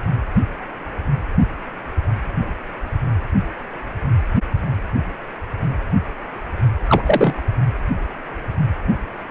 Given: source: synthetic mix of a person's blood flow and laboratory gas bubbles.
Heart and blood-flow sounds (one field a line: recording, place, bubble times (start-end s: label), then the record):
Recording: Doppler ultrasound of blood flow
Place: precordium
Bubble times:
6.88-7.01 s: bubbles
7.04-7.41 s: bubbles
From the record:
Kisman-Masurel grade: 213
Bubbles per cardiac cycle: several, 3 to 8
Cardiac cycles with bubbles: 1 to 10%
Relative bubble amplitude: loud (0.450 to 0.775)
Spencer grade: 1 (occasional bubble signal discernible with the cardiac motion signal, with majority of cardiac periods free of bubbles)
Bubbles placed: only in the low amplitude regions of the cardiac cycle